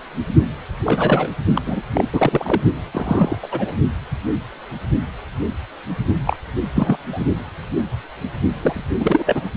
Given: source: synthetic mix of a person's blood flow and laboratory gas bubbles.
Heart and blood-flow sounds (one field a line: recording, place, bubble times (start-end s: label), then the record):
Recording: Doppler ultrasound of blood flow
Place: precordium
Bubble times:
0.84-1.29 s: bubbles
1.55-1.61 s: bubbles
1.66-1.82 s: bubbles
1.94-2.04 s: bubbles
2.13-2.61 s: bubbles
2.91-3.38 s: bubbles
3.42-3.48 s: bubbles
3.51-3.73 s: bubbles
6.26-6.37 s: bubbles
6.75-6.97 s: bubbles
7.12-7.24 s: bubbles
8.59-8.85 s: bubbles
9.00-9.42 s: bubbles
From the record:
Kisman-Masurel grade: 233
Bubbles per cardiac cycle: several, 3 to 8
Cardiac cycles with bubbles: 50 to 99%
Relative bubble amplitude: loud (0.450 to 0.775)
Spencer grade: 3 (all of the cardiac periods contain showers or single bubble signals, but not dominating or overriding the cardiac motion signals)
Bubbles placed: only in the low amplitude regions of the cardiac cycle